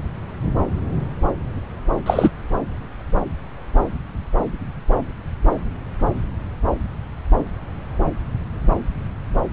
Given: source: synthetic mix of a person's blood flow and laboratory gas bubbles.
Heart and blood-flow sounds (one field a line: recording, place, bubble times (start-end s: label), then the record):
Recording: Doppler ultrasound of blood flow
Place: subclavian vein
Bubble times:
2.06-2.31 s: bubbles
From the record:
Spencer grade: 2 (many but less than half of the cardiac periods contain bubble signals, singularly or in groups)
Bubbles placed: anywhere in the cardiac cycle